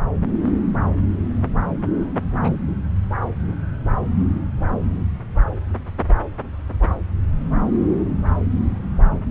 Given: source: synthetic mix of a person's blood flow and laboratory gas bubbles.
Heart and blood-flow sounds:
Doppler ultrasound of blood flow; subclavian vein
2.42-2.50 s: bubbles
From the record:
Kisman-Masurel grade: 111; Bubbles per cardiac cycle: 1 to 2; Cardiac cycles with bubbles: 1 to 10%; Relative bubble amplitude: barely perceptible (0.100 to 0.250); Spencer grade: 1 (occasional bubble signal discernible with the cardiac motion signal, with majority of cardiac periods free of bubbles); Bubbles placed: anywhere in the cardiac cycle

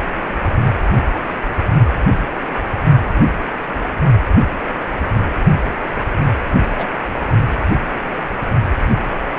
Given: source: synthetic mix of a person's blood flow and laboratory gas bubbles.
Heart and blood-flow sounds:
Doppler ultrasound of blood flow; precordium
6.77-6.87 s: bubbles
From the record:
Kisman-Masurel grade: 122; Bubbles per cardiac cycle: 1 to 2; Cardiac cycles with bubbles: 10 to 50%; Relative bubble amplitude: moderate (0.250 to 0.450); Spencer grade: 2 (many but less than half of the cardiac periods contain bubble signals, singularly or in groups); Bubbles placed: only in the low amplitude regions of the cardiac cycle

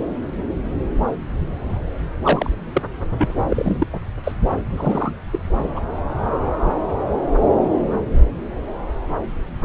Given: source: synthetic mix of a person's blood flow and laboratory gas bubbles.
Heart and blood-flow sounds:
Doppler ultrasound of blood flow; subclavian vein
2.23-2.50 s: bubbles
2.73-2.83 s: bubbles
3.18-3.33 s: bubbles
3.48-3.87 s: bubbles
3.92-4.00 s: bubbles
4.24-4.32 s: bubbles
4.76-5.16 s: bubbles
5.32-5.39 s: bubbles
5.75-5.79 s: bubbles
From the record:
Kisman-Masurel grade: 222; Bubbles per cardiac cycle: several, 3 to 8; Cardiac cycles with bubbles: 10 to 50%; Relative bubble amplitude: moderate (0.250 to 0.450); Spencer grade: 2 (many but less than half of the cardiac periods contain bubble signals, singularly or in groups); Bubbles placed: anywhere in the cardiac cycle

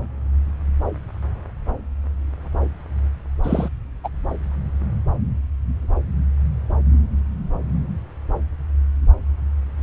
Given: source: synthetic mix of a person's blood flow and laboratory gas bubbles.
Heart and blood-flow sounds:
Doppler ultrasound of blood flow; subclavian vein
3.43-3.70 s: bubbles
4.04-4.09 s: bubbles
From the record:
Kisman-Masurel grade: 113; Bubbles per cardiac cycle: 1 to 2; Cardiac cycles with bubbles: 1 to 10%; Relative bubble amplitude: loud (0.450 to 0.775); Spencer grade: 1 (occasional bubble signal discernible with the cardiac motion signal, with majority of cardiac periods free of bubbles); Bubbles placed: anywhere in the cardiac cycle

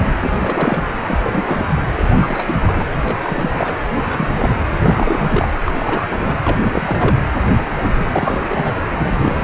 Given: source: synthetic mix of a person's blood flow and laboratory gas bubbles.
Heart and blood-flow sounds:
Doppler ultrasound of blood flow; precordium
0.00-0.18 s: bubbles
0.21-0.93 s: bubbles
1.03-1.19 s: bubbles
1.23-1.82 s: bubbles
1.96-2.87 s: bubbles
2.92-3.19 s: bubbles
3.23-3.74 s: bubbles
3.95-4.56 s: bubbles
4.81-5.48 s: bubbles
5.66-6.38 s: bubbles
6.43-6.58 s: bubbles
6.62-7.16 s: bubbles
7.71-7.92 s: bubbles
7.98-8.07 s: bubbles
8.12-8.46 s: bubbles
8.49-8.76 s: bubbles
8.97-9.44 s: bubbles
From the record:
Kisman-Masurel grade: 342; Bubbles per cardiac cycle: rolling drumbeat, 9 or more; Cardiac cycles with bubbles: 100%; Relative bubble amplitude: moderate (0.250 to 0.450); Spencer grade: 3 (all of the cardiac periods contain showers or single bubble signals, but not dominating or overriding the cardiac motion signals); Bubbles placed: anywhere in the cardiac cycle

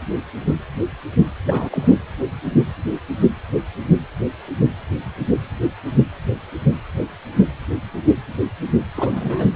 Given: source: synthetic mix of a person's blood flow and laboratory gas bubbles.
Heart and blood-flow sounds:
Doppler ultrasound of blood flow; precordium
1.45-1.95 s: bubbles
8.95-9.47 s: bubbles
From the record:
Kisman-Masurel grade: 222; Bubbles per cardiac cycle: several, 3 to 8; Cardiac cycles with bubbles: 10 to 50%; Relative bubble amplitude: moderate (0.250 to 0.450); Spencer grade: 2 (many but less than half of the cardiac periods contain bubble signals, singularly or in groups); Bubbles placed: anywhere in the cardiac cycle

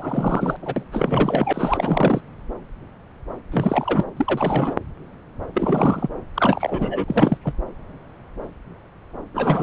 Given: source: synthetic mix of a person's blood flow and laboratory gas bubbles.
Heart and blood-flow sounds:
Doppler ultrasound of blood flow; subclavian vein
0.00-0.57 s: bubbles
0.62-0.83 s: bubbles
0.92-2.21 s: bubbles
3.51-4.06 s: bubbles
4.17-4.76 s: bubbles
5.54-6.08 s: bubbles
6.34-7.04 s: bubbles
7.07-7.38 s: bubbles
7.45-7.53 s: bubbles
9.34-9.63 s: bubbles
From the record:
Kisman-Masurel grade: 333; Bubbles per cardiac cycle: rolling drumbeat, 9 or more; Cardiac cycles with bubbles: 50 to 99%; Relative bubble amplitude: loud (0.450 to 0.775); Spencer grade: 3 (all of the cardiac periods contain showers or single bubble signals, but not dominating or overriding the cardiac motion signals); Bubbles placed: anywhere in the cardiac cycle

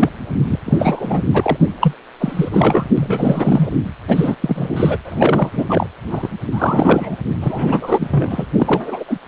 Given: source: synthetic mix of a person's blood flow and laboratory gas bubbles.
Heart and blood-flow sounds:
Doppler ultrasound of blood flow; precordium
0.00-0.09 s: bubbles
0.47-0.59 s: bubbles
0.65-1.22 s: bubbles
1.33-1.57 s: bubbles
1.80-1.93 s: bubbles
2.20-2.88 s: bubbles
2.97-3.73 s: bubbles
4.08-4.35 s: bubbles
4.42-4.98 s: bubbles
5.04-5.64 s: bubbles
5.68-5.87 s: bubbles
6.10-6.29 s: bubbles
6.52-7.17 s: bubbles
7.41-8.46 s: bubbles
8.58-9.04 s: bubbles
9.07-9.18 s: bubbles
From the record:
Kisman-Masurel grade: 333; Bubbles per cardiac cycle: rolling drumbeat, 9 or more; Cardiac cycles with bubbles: 50 to 99%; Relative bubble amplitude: loud (0.450 to 0.775); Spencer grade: 3 (all of the cardiac periods contain showers or single bubble signals, but not dominating or overriding the cardiac motion signals); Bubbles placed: anywhere in the cardiac cycle

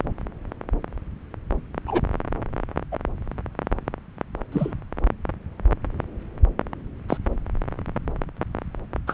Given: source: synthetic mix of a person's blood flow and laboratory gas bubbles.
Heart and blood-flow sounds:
Doppler ultrasound of blood flow; subclavian vein
1.87-2.01 s: bubbles
2.92-2.96 s: bubbles
4.52-4.75 s: bubbles
7.08-7.18 s: bubbles
9.07-9.14 s: bubbles
From the record:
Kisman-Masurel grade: 122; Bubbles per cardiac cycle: 1 to 2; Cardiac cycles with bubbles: 10 to 50%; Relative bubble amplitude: moderate (0.250 to 0.450); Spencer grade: 2 (many but less than half of the cardiac periods contain bubble signals, singularly or in groups); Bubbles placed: anywhere in the cardiac cycle

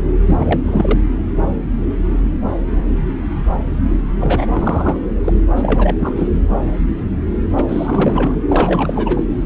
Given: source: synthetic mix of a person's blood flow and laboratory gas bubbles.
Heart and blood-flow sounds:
Doppler ultrasound of blood flow; subclavian vein
0.26-0.61 s: bubbles
0.64-1.00 s: bubbles
4.19-5.06 s: bubbles
5.24-5.33 s: bubbles
5.56-5.96 s: bubbles
5.99-6.30 s: bubbles
6.33-6.39 s: bubbles
7.56-7.65 s: bubbles
7.69-8.39 s: bubbles
8.48-9.24 s: bubbles
From the record:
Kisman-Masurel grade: 332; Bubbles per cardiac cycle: rolling drumbeat, 9 or more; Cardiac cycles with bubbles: 50 to 99%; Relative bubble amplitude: moderate (0.250 to 0.450); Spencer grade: 3 (all of the cardiac periods contain showers or single bubble signals, but not dominating or overriding the cardiac motion signals); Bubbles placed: anywhere in the cardiac cycle

